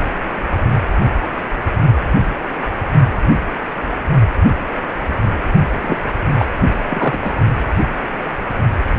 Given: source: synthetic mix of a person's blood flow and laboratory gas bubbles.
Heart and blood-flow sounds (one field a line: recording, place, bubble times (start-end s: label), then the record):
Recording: Doppler ultrasound of blood flow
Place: precordium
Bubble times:
5.81-5.97 s: bubbles
6.38-6.46 s: bubbles
6.90-7.17 s: bubbles
7.24-7.31 s: bubbles
From the record:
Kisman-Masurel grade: 223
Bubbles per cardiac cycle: several, 3 to 8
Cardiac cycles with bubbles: 10 to 50%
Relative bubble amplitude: loud (0.450 to 0.775)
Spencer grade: 2 (many but less than half of the cardiac periods contain bubble signals, singularly or in groups)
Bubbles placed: only in the low amplitude regions of the cardiac cycle